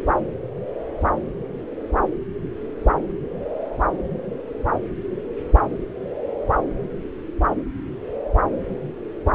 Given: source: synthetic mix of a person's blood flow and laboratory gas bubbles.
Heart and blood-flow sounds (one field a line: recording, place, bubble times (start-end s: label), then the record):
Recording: Doppler ultrasound of blood flow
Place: subclavian vein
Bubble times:
no bubbles
From the record:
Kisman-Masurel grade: 000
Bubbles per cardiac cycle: 0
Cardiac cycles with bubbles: 0%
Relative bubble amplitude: no bubbles discernible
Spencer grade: 0 (complete lack of bubble signals)